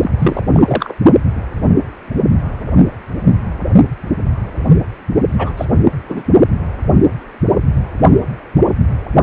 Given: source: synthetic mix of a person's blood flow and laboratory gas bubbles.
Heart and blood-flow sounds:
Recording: Doppler ultrasound of blood flow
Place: precordium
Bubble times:
0.01-0.10 s: bubbles
0.18-0.42 s: bubbles
0.53-0.93 s: bubbles
5.38-5.53 s: bubbles
5.57-5.65 s: bubbles
6.08-6.22 s: bubbles
From the record:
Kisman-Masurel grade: 223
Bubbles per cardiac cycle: several, 3 to 8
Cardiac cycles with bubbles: 10 to 50%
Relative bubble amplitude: loud (0.450 to 0.775)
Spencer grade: 2 (many but less than half of the cardiac periods contain bubble signals, singularly or in groups)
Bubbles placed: only in the low amplitude regions of the cardiac cycle

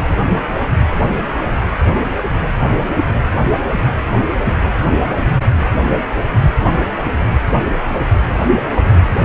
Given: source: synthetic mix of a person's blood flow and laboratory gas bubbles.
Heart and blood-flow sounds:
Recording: Doppler ultrasound of blood flow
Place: precordium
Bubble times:
9.20-9.25 s: bubbles
From the record:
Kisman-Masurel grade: 123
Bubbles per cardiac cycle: 1 to 2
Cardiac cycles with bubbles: 10 to 50%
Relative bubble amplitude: loud (0.450 to 0.775)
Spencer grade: 2 (many but less than half of the cardiac periods contain bubble signals, singularly or in groups)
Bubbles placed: anywhere in the cardiac cycle

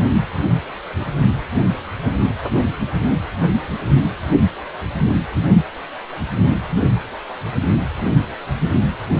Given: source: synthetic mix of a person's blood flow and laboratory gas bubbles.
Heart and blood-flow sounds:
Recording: Doppler ultrasound of blood flow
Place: precordium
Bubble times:
0.97-1.16 s: bubbles
From the record:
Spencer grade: 2 (many but less than half of the cardiac periods contain bubble signals, singularly or in groups)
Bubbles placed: anywhere in the cardiac cycle

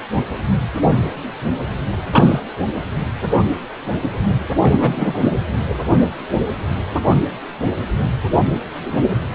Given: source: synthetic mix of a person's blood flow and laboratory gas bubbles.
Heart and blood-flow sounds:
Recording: Doppler ultrasound of blood flow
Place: precordium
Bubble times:
2.12-2.39 s: bubbles
4.62-5.34 s: bubbles
From the record:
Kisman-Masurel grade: 123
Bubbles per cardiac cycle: 1 to 2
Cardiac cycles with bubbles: 10 to 50%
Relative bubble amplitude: loud (0.450 to 0.775)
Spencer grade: 2 (many but less than half of the cardiac periods contain bubble signals, singularly or in groups)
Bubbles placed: anywhere in the cardiac cycle

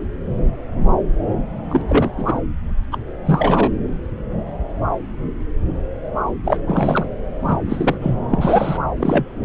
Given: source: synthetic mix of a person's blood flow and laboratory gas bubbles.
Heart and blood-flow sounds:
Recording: Doppler ultrasound of blood flow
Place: subclavian vein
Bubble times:
1.69-1.82 s: bubbles
1.88-2.11 s: bubbles
2.17-2.40 s: bubbles
2.92-2.98 s: bubbles
3.25-3.71 s: bubbles
6.45-6.58 s: bubbles
6.67-7.08 s: bubbles
7.41-7.60 s: bubbles
7.66-7.98 s: bubbles
8.01-8.15 s: bubbles
8.30-8.78 s: bubbles
8.99-9.26 s: bubbles
From the record:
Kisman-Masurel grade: 222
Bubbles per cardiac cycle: several, 3 to 8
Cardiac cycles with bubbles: 10 to 50%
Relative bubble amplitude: moderate (0.250 to 0.450)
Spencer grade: 2 (many but less than half of the cardiac periods contain bubble signals, singularly or in groups)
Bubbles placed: anywhere in the cardiac cycle

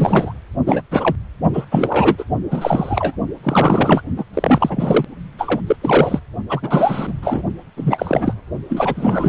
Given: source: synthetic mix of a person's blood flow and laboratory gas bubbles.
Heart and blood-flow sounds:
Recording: Doppler ultrasound of blood flow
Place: precordium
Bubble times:
0.00-0.34 s: bubbles
0.66-0.82 s: bubbles
0.91-1.17 s: bubbles
1.53-1.65 s: bubbles
1.71-2.25 s: bubbles
2.50-3.16 s: bubbles
3.43-4.02 s: bubbles
4.16-4.24 s: bubbles
4.34-5.04 s: bubbles
5.38-5.60 s: bubbles
5.66-5.76 s: bubbles
5.81-6.20 s: bubbles
6.48-7.13 s: bubbles
7.22-7.43 s: bubbles
7.76-8.34 s: bubbles
8.70-9.28 s: bubbles
From the record:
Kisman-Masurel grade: 343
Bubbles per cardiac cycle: rolling drumbeat, 9 or more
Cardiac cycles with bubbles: 100%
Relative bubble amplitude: loud (0.450 to 0.775)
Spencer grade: 3 (all of the cardiac periods contain showers or single bubble signals, but not dominating or overriding the cardiac motion signals)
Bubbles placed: only in the low amplitude regions of the cardiac cycle

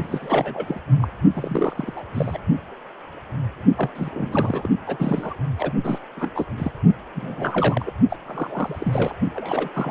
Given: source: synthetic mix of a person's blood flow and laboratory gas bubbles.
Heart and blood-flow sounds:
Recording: Doppler ultrasound of blood flow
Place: precordium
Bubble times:
0.03-0.80 s: bubbles
0.98-1.07 s: bubbles
1.33-1.93 s: bubbles
1.97-2.04 s: bubbles
2.14-2.38 s: bubbles
3.77-3.90 s: bubbles
3.95-4.69 s: bubbles
4.86-5.33 s: bubbles
5.58-5.71 s: bubbles
5.83-5.98 s: bubbles
6.17-6.29 s: bubbles
6.34-6.46 s: bubbles
6.57-6.71 s: bubbles
7.14-7.92 s: bubbles
8.10-8.17 s: bubbles
8.26-9.15 s: bubbles
9.34-9.69 s: bubbles
9.73-9.91 s: bubbles
From the record:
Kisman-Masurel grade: 332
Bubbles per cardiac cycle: rolling drumbeat, 9 or more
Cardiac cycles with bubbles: 50 to 99%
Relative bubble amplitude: moderate (0.250 to 0.450)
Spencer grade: 3 (all of the cardiac periods contain showers or single bubble signals, but not dominating or overriding the cardiac motion signals)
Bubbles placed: only in the low amplitude regions of the cardiac cycle

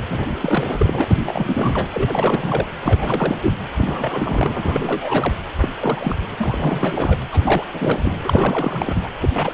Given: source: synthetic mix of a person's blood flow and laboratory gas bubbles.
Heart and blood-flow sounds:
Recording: Doppler ultrasound of blood flow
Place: precordium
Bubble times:
0.09-0.30 s: bubbles
0.41-1.04 s: bubbles
1.08-1.89 s: bubbles
1.94-2.68 s: bubbles
2.81-3.37 s: bubbles
3.43-3.53 s: bubbles
3.77-4.53 s: bubbles
4.57-5.33 s: bubbles
5.60-5.68 s: bubbles
5.79-6.15 s: bubbles
6.38-7.17 s: bubbles
7.31-7.64 s: bubbles
7.71-8.19 s: bubbles
8.24-9.09 s: bubbles
9.21-9.30 s: bubbles
9.34-9.53 s: bubbles
From the record:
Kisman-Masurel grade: 342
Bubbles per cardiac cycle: rolling drumbeat, 9 or more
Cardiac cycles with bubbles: 100%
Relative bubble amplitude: moderate (0.250 to 0.450)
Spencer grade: 3 (all of the cardiac periods contain showers or single bubble signals, but not dominating or overriding the cardiac motion signals)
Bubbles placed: anywhere in the cardiac cycle

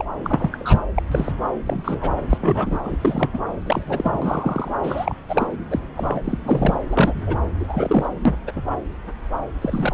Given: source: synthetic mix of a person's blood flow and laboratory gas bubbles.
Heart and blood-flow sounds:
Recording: Doppler ultrasound of blood flow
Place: subclavian vein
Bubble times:
0.00-0.05 s: bubbles
0.24-0.49 s: bubbles
0.52-0.88 s: bubbles
0.95-1.02 s: bubbles
1.11-1.32 s: bubbles
1.65-2.10 s: bubbles
2.29-2.38 s: bubbles
2.40-2.78 s: bubbles
2.83-2.98 s: bubbles
3.02-3.29 s: bubbles
3.33-3.38 s: bubbles
3.65-3.85 s: bubbles
3.87-4.18 s: bubbles
4.22-4.71 s: bubbles
4.83-5.16 s: bubbles
5.28-5.47 s: bubbles
5.71-5.79 s: bubbles
5.97-6.22 s: bubbles
6.24-6.39 s: bubbles
6.43-6.77 s: bubbles
6.88-7.37 s: bubbles
7.60-8.12 s: bubbles
8.25-8.35 s: bubbles
8.47-8.52 s: bubbles
8.55-8.62 s: bubbles
9.61-9.94 s: bubbles
From the record:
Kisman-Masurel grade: 232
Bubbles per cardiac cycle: several, 3 to 8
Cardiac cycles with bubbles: 50 to 99%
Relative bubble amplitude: moderate (0.250 to 0.450)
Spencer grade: 3 (all of the cardiac periods contain showers or single bubble signals, but not dominating or overriding the cardiac motion signals)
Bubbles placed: anywhere in the cardiac cycle

